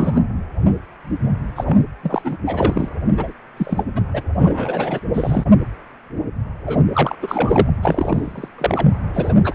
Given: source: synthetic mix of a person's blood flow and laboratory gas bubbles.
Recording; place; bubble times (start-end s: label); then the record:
Doppler ultrasound of blood flow; precordium
0.00-0.20 s: bubbles
1.55-1.77 s: bubbles
2.03-2.37 s: bubbles
2.46-2.89 s: bubbles
3.17-3.32 s: bubbles
3.57-3.83 s: bubbles
3.95-4.01 s: bubbles
4.13-4.23 s: bubbles
4.38-5.00 s: bubbles
5.14-5.46 s: bubbles
6.66-6.81 s: bubbles
6.93-7.16 s: bubbles
7.22-7.71 s: bubbles
7.82-8.49 s: bubbles
8.58-8.88 s: bubbles
9.14-9.33 s: bubbles
9.44-9.55 s: bubbles
From the record:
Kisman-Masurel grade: 332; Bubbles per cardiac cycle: rolling drumbeat, 9 or more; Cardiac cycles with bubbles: 50 to 99%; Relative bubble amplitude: moderate (0.250 to 0.450); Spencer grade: 3 (all of the cardiac periods contain showers or single bubble signals, but not dominating or overriding the cardiac motion signals); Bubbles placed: anywhere in the cardiac cycle